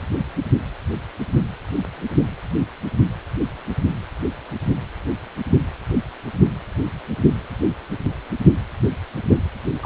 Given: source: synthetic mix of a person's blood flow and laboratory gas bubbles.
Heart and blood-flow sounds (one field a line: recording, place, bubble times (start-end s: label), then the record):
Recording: Doppler ultrasound of blood flow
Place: precordium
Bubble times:
9.82-9.86 s: bubbles
From the record:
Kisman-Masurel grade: 112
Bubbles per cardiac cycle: 1 to 2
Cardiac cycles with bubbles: 1 to 10%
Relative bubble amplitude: moderate (0.250 to 0.450)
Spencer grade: 1 (occasional bubble signal discernible with the cardiac motion signal, with majority of cardiac periods free of bubbles)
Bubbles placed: only in the low amplitude regions of the cardiac cycle